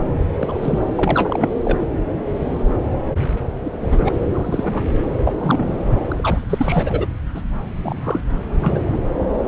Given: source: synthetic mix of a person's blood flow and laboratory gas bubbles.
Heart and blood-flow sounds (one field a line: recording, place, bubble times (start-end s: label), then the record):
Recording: Doppler ultrasound of blood flow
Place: subclavian vein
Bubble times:
0.38-0.58 s: bubbles
0.61-0.79 s: bubbles
0.95-1.53 s: bubbles
1.65-1.78 s: bubbles
3.65-3.71 s: bubbles
3.82-4.15 s: bubbles
4.33-4.85 s: bubbles
5.18-5.22 s: bubbles
5.25-5.33 s: bubbles
5.36-5.75 s: bubbles
6.12-6.46 s: bubbles
6.50-7.06 s: bubbles
7.34-7.41 s: bubbles
7.82-8.21 s: bubbles
8.63-9.12 s: bubbles
From the record:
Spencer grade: 3 (all of the cardiac periods contain showers or single bubble signals, but not dominating or overriding the cardiac motion signals)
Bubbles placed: anywhere in the cardiac cycle